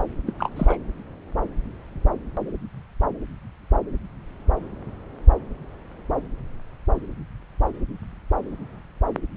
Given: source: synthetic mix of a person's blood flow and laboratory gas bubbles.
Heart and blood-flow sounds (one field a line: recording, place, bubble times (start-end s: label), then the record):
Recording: Doppler ultrasound of blood flow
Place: subclavian vein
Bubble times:
0.27-0.33 s: bubbles
0.39-0.49 s: bubbles
0.56-0.77 s: bubbles
From the record:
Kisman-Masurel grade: 212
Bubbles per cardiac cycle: several, 3 to 8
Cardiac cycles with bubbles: 1 to 10%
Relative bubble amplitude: moderate (0.250 to 0.450)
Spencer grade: 1 (occasional bubble signal discernible with the cardiac motion signal, with majority of cardiac periods free of bubbles)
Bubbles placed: anywhere in the cardiac cycle